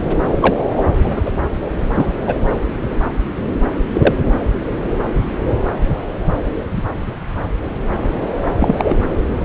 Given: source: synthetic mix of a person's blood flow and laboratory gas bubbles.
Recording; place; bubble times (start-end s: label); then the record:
Doppler ultrasound of blood flow; subclavian vein
0.40-0.54 s: bubbles
0.76-0.84 s: bubbles
1.03-1.20 s: bubbles
1.25-1.30 s: bubbles
1.94-2.13 s: bubbles
2.27-2.35 s: bubbles
3.90-4.15 s: bubbles
8.59-8.95 s: bubbles
From the record:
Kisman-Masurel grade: 123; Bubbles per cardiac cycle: 1 to 2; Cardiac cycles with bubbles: 10 to 50%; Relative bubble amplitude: loud (0.450 to 0.775); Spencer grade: 2 (many but less than half of the cardiac periods contain bubble signals, singularly or in groups); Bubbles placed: anywhere in the cardiac cycle